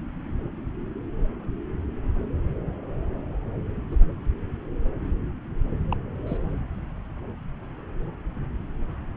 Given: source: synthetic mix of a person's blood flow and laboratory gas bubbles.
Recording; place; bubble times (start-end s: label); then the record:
Doppler ultrasound of blood flow; subclavian vein
3.91-3.97 s: bubbles
5.91-5.97 s: bubbles
6.27-6.37 s: bubbles
From the record:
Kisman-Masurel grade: 111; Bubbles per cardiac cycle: 1 to 2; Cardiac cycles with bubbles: 1 to 10%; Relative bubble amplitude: barely perceptible (0.100 to 0.250); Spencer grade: 1 (occasional bubble signal discernible with the cardiac motion signal, with majority of cardiac periods free of bubbles); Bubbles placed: anywhere in the cardiac cycle